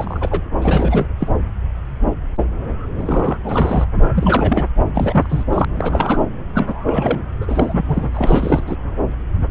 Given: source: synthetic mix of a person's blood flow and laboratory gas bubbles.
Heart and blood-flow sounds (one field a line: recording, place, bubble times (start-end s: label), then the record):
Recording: Doppler ultrasound of blood flow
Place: subclavian vein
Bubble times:
0.00-0.40 s: bubbles
0.61-1.08 s: bubbles
1.19-1.28 s: bubbles
2.97-3.38 s: bubbles
3.44-3.88 s: bubbles
4.16-4.65 s: bubbles
4.95-5.43 s: bubbles
5.53-5.65 s: bubbles
5.75-6.21 s: bubbles
6.54-7.22 s: bubbles
7.41-7.85 s: bubbles
7.88-8.08 s: bubbles
8.12-8.75 s: bubbles
From the record:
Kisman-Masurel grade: 332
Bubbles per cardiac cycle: rolling drumbeat, 9 or more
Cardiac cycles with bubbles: 50 to 99%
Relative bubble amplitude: moderate (0.250 to 0.450)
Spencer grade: 3 (all of the cardiac periods contain showers or single bubble signals, but not dominating or overriding the cardiac motion signals)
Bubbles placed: anywhere in the cardiac cycle